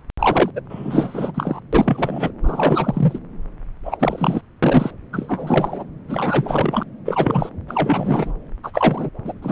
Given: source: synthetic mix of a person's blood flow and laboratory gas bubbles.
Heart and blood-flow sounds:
Doppler ultrasound of blood flow; subclavian vein
0.19-0.51 s: bubbles
0.55-0.61 s: bubbles
0.69-1.60 s: bubbles
1.73-2.31 s: bubbles
2.43-3.19 s: bubbles
3.85-4.41 s: bubbles
4.62-4.91 s: bubbles
5.12-5.85 s: bubbles
6.08-6.83 s: bubbles
7.05-7.50 s: bubbles
7.68-8.33 s: bubbles
8.63-9.10 s: bubbles
9.24-9.33 s: bubbles
9.42-9.52 s: bubbles
From the record:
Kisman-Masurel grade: 343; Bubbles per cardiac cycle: rolling drumbeat, 9 or more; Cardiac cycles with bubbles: 100%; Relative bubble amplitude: loud (0.450 to 0.775); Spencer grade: 3 (all of the cardiac periods contain showers or single bubble signals, but not dominating or overriding the cardiac motion signals); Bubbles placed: anywhere in the cardiac cycle

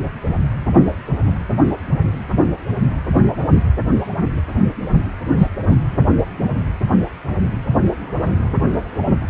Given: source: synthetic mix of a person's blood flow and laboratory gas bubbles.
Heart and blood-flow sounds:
Doppler ultrasound of blood flow; precordium
5.38-5.48 s: bubbles
5.67-5.77 s: bubbles
From the record:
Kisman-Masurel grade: 123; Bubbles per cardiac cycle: 1 to 2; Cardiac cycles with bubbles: 10 to 50%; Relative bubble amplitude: loud (0.450 to 0.775); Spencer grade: 2 (many but less than half of the cardiac periods contain bubble signals, singularly or in groups); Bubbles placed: anywhere in the cardiac cycle

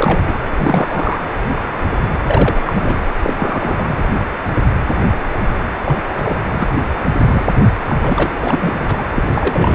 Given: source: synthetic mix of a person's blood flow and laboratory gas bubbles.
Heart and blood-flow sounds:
Doppler ultrasound of blood flow; precordium
0.00-0.19 s: bubbles
0.28-0.34 s: bubbles
0.57-1.18 s: bubbles
2.27-2.62 s: bubbles
2.66-3.01 s: bubbles
3.22-3.33 s: bubbles
3.37-4.04 s: bubbles
5.85-6.00 s: bubbles
6.17-6.42 s: bubbles
6.49-6.68 s: bubbles
6.75-6.86 s: bubbles
7.25-7.45 s: bubbles
7.88-8.37 s: bubbles
8.42-8.74 s: bubbles
8.78-8.84 s: bubbles
8.88-9.04 s: bubbles
9.14-9.22 s: bubbles
9.29-9.75 s: bubbles
From the record:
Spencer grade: 3 (all of the cardiac periods contain showers or single bubble signals, but not dominating or overriding the cardiac motion signals); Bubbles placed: anywhere in the cardiac cycle

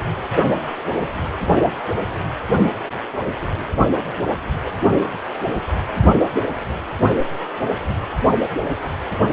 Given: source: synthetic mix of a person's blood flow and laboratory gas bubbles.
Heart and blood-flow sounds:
Doppler ultrasound of blood flow; precordium
no bubbles
From the record:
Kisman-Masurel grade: 000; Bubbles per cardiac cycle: 0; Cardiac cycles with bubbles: 0%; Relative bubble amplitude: no bubbles discernible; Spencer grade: 0 (complete lack of bubble signals)

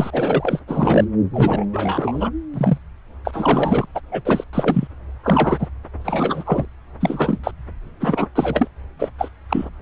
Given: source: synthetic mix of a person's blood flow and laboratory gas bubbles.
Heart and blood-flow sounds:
Doppler ultrasound of blood flow; subclavian vein
0.00-0.60 s: bubbles
0.67-1.06 s: bubbles
1.33-1.65 s: bubbles
1.73-2.30 s: bubbles
2.53-2.78 s: bubbles
3.24-3.85 s: bubbles
3.94-4.00 s: bubbles
4.11-4.22 s: bubbles
4.25-4.44 s: bubbles
4.53-4.88 s: bubbles
5.23-5.68 s: bubbles
6.04-6.66 s: bubbles
7.00-7.40 s: bubbles
7.44-7.51 s: bubbles
8.00-8.26 s: bubbles
8.35-8.67 s: bubbles
8.99-9.09 s: bubbles
9.18-9.29 s: bubbles
9.48-9.65 s: bubbles
From the record:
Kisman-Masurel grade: 243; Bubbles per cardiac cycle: several, 3 to 8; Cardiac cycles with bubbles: 100%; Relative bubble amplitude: loud (0.450 to 0.775); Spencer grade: 3 (all of the cardiac periods contain showers or single bubble signals, but not dominating or overriding the cardiac motion signals); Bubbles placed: anywhere in the cardiac cycle

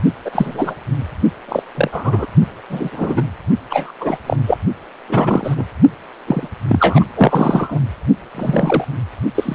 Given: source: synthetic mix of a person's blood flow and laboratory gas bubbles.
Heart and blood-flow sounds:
Doppler ultrasound of blood flow; precordium
0.24-0.75 s: bubbles
1.48-1.62 s: bubbles
1.75-2.26 s: bubbles
2.69-3.27 s: bubbles
3.70-3.92 s: bubbles
4.00-4.18 s: bubbles
4.26-4.37 s: bubbles
4.46-4.58 s: bubbles
5.08-5.64 s: bubbles
6.26-6.48 s: bubbles
6.67-7.04 s: bubbles
7.16-7.79 s: bubbles
8.35-8.85 s: bubbles
9.35-9.55 s: bubbles
From the record:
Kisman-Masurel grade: 243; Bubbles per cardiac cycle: several, 3 to 8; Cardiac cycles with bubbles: 100%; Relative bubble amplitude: loud (0.450 to 0.775); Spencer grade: 3 (all of the cardiac periods contain showers or single bubble signals, but not dominating or overriding the cardiac motion signals); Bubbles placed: only in the low amplitude regions of the cardiac cycle

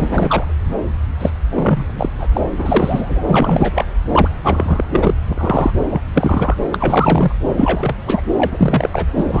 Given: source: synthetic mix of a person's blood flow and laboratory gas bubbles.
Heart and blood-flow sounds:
Doppler ultrasound of blood flow; subclavian vein
0.00-0.54 s: bubbles
1.19-1.31 s: bubbles
1.49-1.85 s: bubbles
1.95-2.09 s: bubbles
2.19-2.26 s: bubbles
2.33-2.41 s: bubbles
2.56-3.23 s: bubbles
3.29-3.85 s: bubbles
4.11-4.28 s: bubbles
4.43-4.84 s: bubbles
4.92-5.14 s: bubbles
5.27-5.71 s: bubbles
5.90-6.01 s: bubbles
6.13-6.55 s: bubbles
6.71-7.32 s: bubbles
7.44-7.95 s: bubbles
8.06-8.21 s: bubbles
8.37-8.89 s: bubbles
8.93-9.05 s: bubbles
9.15-9.40 s: bubbles
From the record:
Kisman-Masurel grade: 343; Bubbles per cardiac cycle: rolling drumbeat, 9 or more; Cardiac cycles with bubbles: 100%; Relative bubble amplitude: loud (0.450 to 0.775); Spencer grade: 3 (all of the cardiac periods contain showers or single bubble signals, but not dominating or overriding the cardiac motion signals); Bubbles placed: anywhere in the cardiac cycle

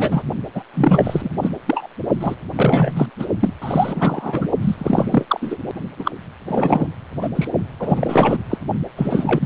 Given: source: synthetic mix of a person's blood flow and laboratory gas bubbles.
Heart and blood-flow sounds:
Doppler ultrasound of blood flow; precordium
0.00-0.22 s: bubbles
0.54-0.63 s: bubbles
0.74-1.30 s: bubbles
1.42-1.50 s: bubbles
1.65-1.88 s: bubbles
2.19-2.35 s: bubbles
2.56-3.10 s: bubbles
3.19-3.26 s: bubbles
3.40-3.53 s: bubbles
3.61-4.48 s: bubbles
4.62-4.75 s: bubbles
4.78-5.57 s: bubbles
5.99-6.12 s: bubbles
6.47-6.87 s: bubbles
7.21-7.29 s: bubbles
7.35-7.48 s: bubbles
7.79-8.38 s: bubbles
8.49-8.58 s: bubbles
8.96-9.46 s: bubbles
From the record:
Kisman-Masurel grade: 333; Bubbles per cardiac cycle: rolling drumbeat, 9 or more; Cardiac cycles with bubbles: 50 to 99%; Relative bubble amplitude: loud (0.450 to 0.775); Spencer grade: 3 (all of the cardiac periods contain showers or single bubble signals, but not dominating or overriding the cardiac motion signals); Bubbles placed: only in the low amplitude regions of the cardiac cycle

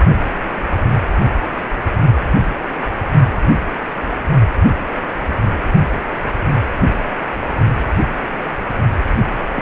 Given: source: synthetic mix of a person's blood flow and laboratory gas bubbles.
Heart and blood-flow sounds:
Doppler ultrasound of blood flow; precordium
9.56-9.62 s: bubbles
From the record:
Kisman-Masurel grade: 122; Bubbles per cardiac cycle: 1 to 2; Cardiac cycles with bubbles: 10 to 50%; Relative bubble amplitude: moderate (0.250 to 0.450); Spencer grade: 2 (many but less than half of the cardiac periods contain bubble signals, singularly or in groups); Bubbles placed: only in the low amplitude regions of the cardiac cycle

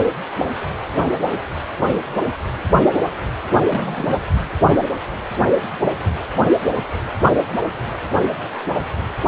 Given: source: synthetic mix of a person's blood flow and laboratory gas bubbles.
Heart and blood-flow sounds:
Doppler ultrasound of blood flow; precordium
3.66-4.17 s: bubbles
From the record:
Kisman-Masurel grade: 211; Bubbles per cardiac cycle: several, 3 to 8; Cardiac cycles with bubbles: 1 to 10%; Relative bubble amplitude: barely perceptible (0.100 to 0.250); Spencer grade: 1 (occasional bubble signal discernible with the cardiac motion signal, with majority of cardiac periods free of bubbles); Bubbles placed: anywhere in the cardiac cycle

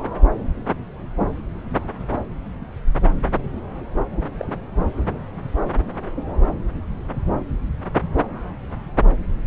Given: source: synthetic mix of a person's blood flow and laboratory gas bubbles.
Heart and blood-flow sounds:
Doppler ultrasound of blood flow; subclavian vein
4.39-4.51 s: bubbles
From the record:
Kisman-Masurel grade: 111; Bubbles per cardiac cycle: 1 to 2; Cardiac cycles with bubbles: 1 to 10%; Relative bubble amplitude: barely perceptible (0.100 to 0.250); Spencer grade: 1 (occasional bubble signal discernible with the cardiac motion signal, with majority of cardiac periods free of bubbles); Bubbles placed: anywhere in the cardiac cycle

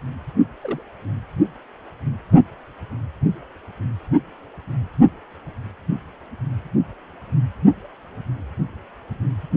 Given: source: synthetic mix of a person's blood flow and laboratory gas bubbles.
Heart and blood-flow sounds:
Doppler ultrasound of blood flow; precordium
0.62-0.82 s: bubbles
From the record:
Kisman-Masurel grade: 121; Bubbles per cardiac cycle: 1 to 2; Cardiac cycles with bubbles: 10 to 50%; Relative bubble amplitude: barely perceptible (0.100 to 0.250); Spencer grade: 2 (many but less than half of the cardiac periods contain bubble signals, singularly or in groups); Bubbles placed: only in the low amplitude regions of the cardiac cycle

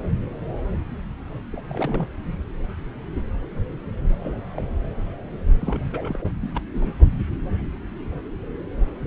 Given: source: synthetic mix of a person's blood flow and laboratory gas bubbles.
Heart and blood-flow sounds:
Doppler ultrasound of blood flow; subclavian vein
1.52-1.62 s: bubbles
1.68-2.08 s: bubbles
4.20-4.38 s: bubbles
4.57-4.62 s: bubbles
5.59-6.18 s: bubbles
6.21-6.26 s: bubbles
6.43-6.61 s: bubbles
6.74-6.89 s: bubbles
From the record:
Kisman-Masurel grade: 221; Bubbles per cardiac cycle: several, 3 to 8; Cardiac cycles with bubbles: 10 to 50%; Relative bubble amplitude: barely perceptible (0.100 to 0.250); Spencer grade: 2 (many but less than half of the cardiac periods contain bubble signals, singularly or in groups); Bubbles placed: anywhere in the cardiac cycle

